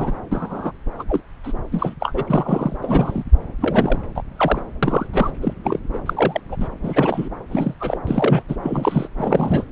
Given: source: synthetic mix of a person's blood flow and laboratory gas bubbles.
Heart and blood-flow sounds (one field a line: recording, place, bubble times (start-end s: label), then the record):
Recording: Doppler ultrasound of blood flow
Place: subclavian vein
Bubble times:
0.00-0.13 s: bubbles
0.31-0.72 s: bubbles
0.98-1.03 s: bubbles
1.09-1.20 s: bubbles
1.43-1.52 s: bubbles
1.71-1.94 s: bubbles
2.00-2.23 s: bubbles
2.27-2.77 s: bubbles
2.81-3.24 s: bubbles
3.60-3.98 s: bubbles
4.15-4.23 s: bubbles
4.36-4.62 s: bubbles
4.83-5.07 s: bubbles
5.13-5.31 s: bubbles
5.42-5.54 s: bubbles
5.64-5.79 s: bubbles
5.93-5.99 s: bubbles
6.06-6.41 s: bubbles
6.49-6.57 s: bubbles
6.60-6.69 s: bubbles
6.83-7.29 s: bubbles
7.51-7.74 s: bubbles
7.79-8.00 s: bubbles
8.07-8.43 s: bubbles
8.48-8.56 s: bubbles
8.62-9.08 s: bubbles
9.17-9.64 s: bubbles
From the record:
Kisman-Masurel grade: 242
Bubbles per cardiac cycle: several, 3 to 8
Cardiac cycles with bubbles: 100%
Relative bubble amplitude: moderate (0.250 to 0.450)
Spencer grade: 3 (all of the cardiac periods contain showers or single bubble signals, but not dominating or overriding the cardiac motion signals)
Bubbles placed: anywhere in the cardiac cycle